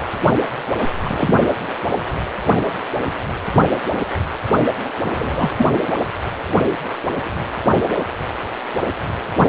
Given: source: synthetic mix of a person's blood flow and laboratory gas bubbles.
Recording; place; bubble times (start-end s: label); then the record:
Doppler ultrasound of blood flow; precordium
1.04-1.35 s: bubbles
5.13-5.50 s: bubbles
5.58-5.66 s: bubbles
From the record:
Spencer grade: 2 (many but less than half of the cardiac periods contain bubble signals, singularly or in groups); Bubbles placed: anywhere in the cardiac cycle